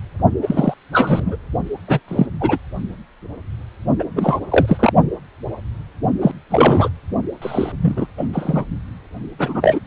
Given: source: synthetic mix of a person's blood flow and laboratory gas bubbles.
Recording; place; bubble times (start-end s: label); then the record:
Doppler ultrasound of blood flow; precordium
0.42-0.74 s: bubbles
0.91-1.36 s: bubbles
1.88-2.00 s: bubbles
2.08-2.27 s: bubbles
2.40-2.57 s: bubbles
3.99-4.04 s: bubbles
4.16-4.40 s: bubbles
4.50-4.93 s: bubbles
6.22-6.32 s: bubbles
6.50-6.89 s: bubbles
7.42-7.72 s: bubbles
7.81-8.06 s: bubbles
8.17-8.29 s: bubbles
8.33-8.66 s: bubbles
9.39-9.79 s: bubbles
From the record:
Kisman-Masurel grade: 233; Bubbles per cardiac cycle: several, 3 to 8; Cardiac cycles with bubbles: 50 to 99%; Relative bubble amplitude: loud (0.450 to 0.775); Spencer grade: 3 (all of the cardiac periods contain showers or single bubble signals, but not dominating or overriding the cardiac motion signals); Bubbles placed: only in the low amplitude regions of the cardiac cycle